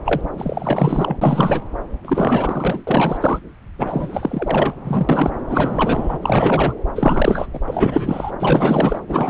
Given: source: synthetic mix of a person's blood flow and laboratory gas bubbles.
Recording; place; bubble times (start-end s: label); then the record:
Doppler ultrasound of blood flow; subclavian vein
0.05-0.21 s: bubbles
0.38-1.17 s: bubbles
1.21-1.61 s: bubbles
2.04-2.81 s: bubbles
2.87-3.39 s: bubbles
3.78-4.75 s: bubbles
4.84-5.30 s: bubbles
5.50-6.18 s: bubbles
6.22-6.76 s: bubbles
6.95-7.49 s: bubbles
7.53-7.60 s: bubbles
7.67-8.31 s: bubbles
8.38-8.99 s: bubbles
9.09-9.30 s: bubbles
From the record:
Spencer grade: 4 (maximum detectable bubble signal sounding continuously throughout systole and diastole of every cardiac period, and overriding the amplitude of the normal cardiac signals); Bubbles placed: anywhere in the cardiac cycle